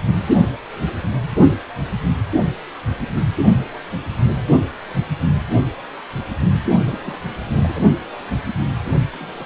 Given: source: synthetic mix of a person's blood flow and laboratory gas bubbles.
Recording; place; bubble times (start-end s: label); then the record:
Doppler ultrasound of blood flow; precordium
6.87-7.19 s: bubbles
7.50-7.83 s: bubbles
9.12-9.45 s: bubbles
From the record:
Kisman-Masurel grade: 221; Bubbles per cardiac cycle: several, 3 to 8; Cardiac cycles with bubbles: 10 to 50%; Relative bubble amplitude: barely perceptible (0.100 to 0.250); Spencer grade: 2 (many but less than half of the cardiac periods contain bubble signals, singularly or in groups); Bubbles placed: only in the low amplitude regions of the cardiac cycle